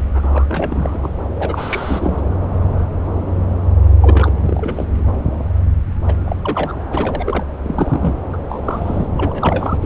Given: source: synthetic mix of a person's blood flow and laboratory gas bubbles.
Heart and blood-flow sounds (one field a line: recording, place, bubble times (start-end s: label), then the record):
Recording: Doppler ultrasound of blood flow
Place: subclavian vein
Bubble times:
0.14-1.10 s: bubbles
1.34-2.23 s: bubbles
4.01-4.31 s: bubbles
4.42-4.90 s: bubbles
6.07-6.14 s: bubbles
6.25-6.36 s: bubbles
6.42-6.79 s: bubbles
6.90-7.43 s: bubbles
7.63-8.14 s: bubbles
8.32-8.37 s: bubbles
8.49-9.09 s: bubbles
9.16-9.78 s: bubbles
9.82-9.86 s: bubbles
From the record:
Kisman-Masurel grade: 332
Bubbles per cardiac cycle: rolling drumbeat, 9 or more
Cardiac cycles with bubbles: 50 to 99%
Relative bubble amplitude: moderate (0.250 to 0.450)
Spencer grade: 3 (all of the cardiac periods contain showers or single bubble signals, but not dominating or overriding the cardiac motion signals)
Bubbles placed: anywhere in the cardiac cycle